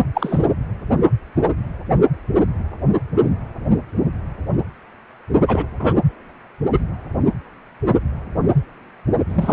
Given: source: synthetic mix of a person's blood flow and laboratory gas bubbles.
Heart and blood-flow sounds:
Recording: Doppler ultrasound of blood flow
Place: precordium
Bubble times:
0.14-0.45 s: bubbles
5.47-5.67 s: bubbles
5.79-5.98 s: bubbles
9.29-9.53 s: bubbles
From the record:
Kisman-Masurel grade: 222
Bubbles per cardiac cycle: several, 3 to 8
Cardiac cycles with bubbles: 10 to 50%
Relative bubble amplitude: moderate (0.250 to 0.450)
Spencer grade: 2 (many but less than half of the cardiac periods contain bubble signals, singularly or in groups)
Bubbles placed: anywhere in the cardiac cycle

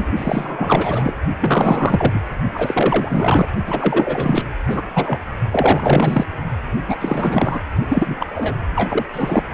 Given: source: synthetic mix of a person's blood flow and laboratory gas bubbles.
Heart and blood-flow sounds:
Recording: Doppler ultrasound of blood flow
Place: precordium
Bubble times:
0.00-0.13 s: bubbles
0.16-1.15 s: bubbles
1.41-2.21 s: bubbles
2.54-3.46 s: bubbles
3.66-4.43 s: bubbles
4.67-4.82 s: bubbles
4.95-5.19 s: bubbles
5.51-6.26 s: bubbles
6.87-6.96 s: bubbles
7.00-7.61 s: bubbles
7.88-8.16 s: bubbles
8.20-8.27 s: bubbles
8.34-8.54 s: bubbles
8.76-9.05 s: bubbles
9.13-9.43 s: bubbles
From the record:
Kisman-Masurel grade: 444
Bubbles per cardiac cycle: continuous sound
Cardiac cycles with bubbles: 100%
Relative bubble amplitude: maximal (0.775 to 0.999)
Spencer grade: 4 (maximum detectable bubble signal sounding continuously throughout systole and diastole of every cardiac period, and overriding the amplitude of the normal cardiac signals)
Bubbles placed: only in the low amplitude regions of the cardiac cycle

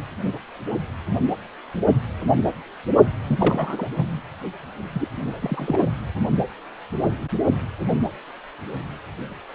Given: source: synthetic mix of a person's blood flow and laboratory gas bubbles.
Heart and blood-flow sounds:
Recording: Doppler ultrasound of blood flow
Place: precordium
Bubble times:
3.22-3.89 s: bubbles
3.97-4.17 s: bubbles
4.93-5.08 s: bubbles
5.42-5.84 s: bubbles
From the record:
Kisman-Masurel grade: 222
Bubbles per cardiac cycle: several, 3 to 8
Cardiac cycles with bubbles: 10 to 50%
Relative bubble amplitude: moderate (0.250 to 0.450)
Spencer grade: 2 (many but less than half of the cardiac periods contain bubble signals, singularly or in groups)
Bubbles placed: only in the low amplitude regions of the cardiac cycle

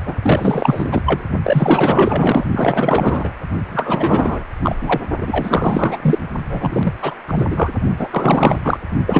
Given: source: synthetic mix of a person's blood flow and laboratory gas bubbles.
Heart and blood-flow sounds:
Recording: Doppler ultrasound of blood flow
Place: precordium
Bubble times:
0.06-0.15 s: bubbles
0.22-1.02 s: bubbles
1.06-1.23 s: bubbles
1.43-2.44 s: bubbles
2.52-3.33 s: bubbles
3.69-4.45 s: bubbles
4.62-4.75 s: bubbles
4.80-5.01 s: bubbles
5.21-5.97 s: bubbles
6.01-6.18 s: bubbles
6.50-6.94 s: bubbles
7.01-7.17 s: bubbles
7.27-7.73 s: bubbles
7.98-8.78 s: bubbles
9.06-9.20 s: bubbles
From the record:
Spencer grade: 4 (maximum detectable bubble signal sounding continuously throughout systole and diastole of every cardiac period, and overriding the amplitude of the normal cardiac signals)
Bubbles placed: only in the low amplitude regions of the cardiac cycle

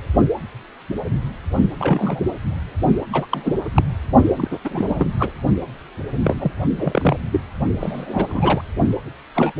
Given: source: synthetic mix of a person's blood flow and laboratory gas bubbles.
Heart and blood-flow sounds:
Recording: Doppler ultrasound of blood flow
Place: precordium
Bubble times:
1.78-2.31 s: bubbles
3.12-3.27 s: bubbles
3.29-3.56 s: bubbles
3.75-3.85 s: bubbles
4.37-4.48 s: bubbles
4.51-4.58 s: bubbles
4.63-5.10 s: bubbles
5.18-5.32 s: bubbles
6.24-6.34 s: bubbles
6.38-6.51 s: bubbles
6.77-7.17 s: bubbles
7.32-7.41 s: bubbles
7.80-8.61 s: bubbles
9.35-9.52 s: bubbles
From the record:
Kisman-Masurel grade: 232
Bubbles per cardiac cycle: several, 3 to 8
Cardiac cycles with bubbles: 50 to 99%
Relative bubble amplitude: moderate (0.250 to 0.450)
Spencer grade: 3 (all of the cardiac periods contain showers or single bubble signals, but not dominating or overriding the cardiac motion signals)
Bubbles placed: only in the low amplitude regions of the cardiac cycle

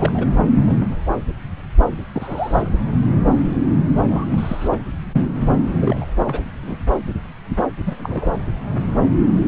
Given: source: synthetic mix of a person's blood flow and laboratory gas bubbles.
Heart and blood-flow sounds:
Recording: Doppler ultrasound of blood flow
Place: subclavian vein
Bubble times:
0.00-0.28 s: bubbles
0.59-0.95 s: bubbles
2.14-2.71 s: bubbles
4.08-4.25 s: bubbles
4.30-4.84 s: bubbles
5.77-6.05 s: bubbles
6.17-6.42 s: bubbles
6.62-6.76 s: bubbles
7.79-8.33 s: bubbles
From the record:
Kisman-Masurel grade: 221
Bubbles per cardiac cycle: several, 3 to 8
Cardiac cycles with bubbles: 10 to 50%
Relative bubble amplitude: barely perceptible (0.100 to 0.250)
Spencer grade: 2 (many but less than half of the cardiac periods contain bubble signals, singularly or in groups)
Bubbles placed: anywhere in the cardiac cycle

